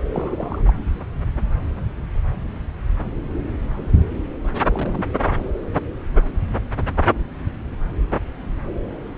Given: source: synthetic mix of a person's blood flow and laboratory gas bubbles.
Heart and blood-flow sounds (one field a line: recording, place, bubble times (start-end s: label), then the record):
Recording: Doppler ultrasound of blood flow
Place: subclavian vein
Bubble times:
0.10-0.61 s: bubbles
0.68-0.73 s: bubbles
4.66-5.05 s: bubbles
5.25-5.31 s: bubbles
5.37-5.50 s: bubbles
From the record:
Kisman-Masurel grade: 221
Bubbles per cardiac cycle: several, 3 to 8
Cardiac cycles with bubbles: 10 to 50%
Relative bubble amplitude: barely perceptible (0.100 to 0.250)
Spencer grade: 2 (many but less than half of the cardiac periods contain bubble signals, singularly or in groups)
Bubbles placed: anywhere in the cardiac cycle